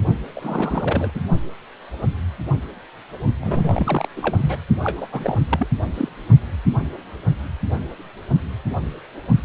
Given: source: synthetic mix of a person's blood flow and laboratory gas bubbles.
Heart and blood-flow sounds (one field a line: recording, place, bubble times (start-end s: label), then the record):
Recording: Doppler ultrasound of blood flow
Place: precordium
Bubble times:
0.36-1.11 s: bubbles
1.15-1.21 s: bubbles
3.40-4.08 s: bubbles
4.16-4.57 s: bubbles
4.83-5.07 s: bubbles
5.12-5.36 s: bubbles
5.49-5.68 s: bubbles
5.94-6.08 s: bubbles
From the record:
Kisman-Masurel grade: 332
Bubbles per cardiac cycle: rolling drumbeat, 9 or more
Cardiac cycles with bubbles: 50 to 99%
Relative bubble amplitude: moderate (0.250 to 0.450)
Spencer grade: 3 (all of the cardiac periods contain showers or single bubble signals, but not dominating or overriding the cardiac motion signals)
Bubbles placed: only in the low amplitude regions of the cardiac cycle